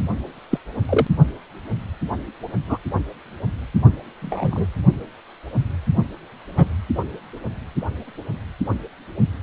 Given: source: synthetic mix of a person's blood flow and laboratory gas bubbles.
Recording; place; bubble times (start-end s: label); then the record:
Doppler ultrasound of blood flow; precordium
0.51-0.58 s: bubbles
0.89-1.07 s: bubbles
2.67-2.78 s: bubbles
4.22-4.67 s: bubbles
6.56-6.67 s: bubbles
From the record:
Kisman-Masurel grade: 122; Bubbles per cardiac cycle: 1 to 2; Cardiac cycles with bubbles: 10 to 50%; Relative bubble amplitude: moderate (0.250 to 0.450); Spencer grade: 2 (many but less than half of the cardiac periods contain bubble signals, singularly or in groups); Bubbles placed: only in the low amplitude regions of the cardiac cycle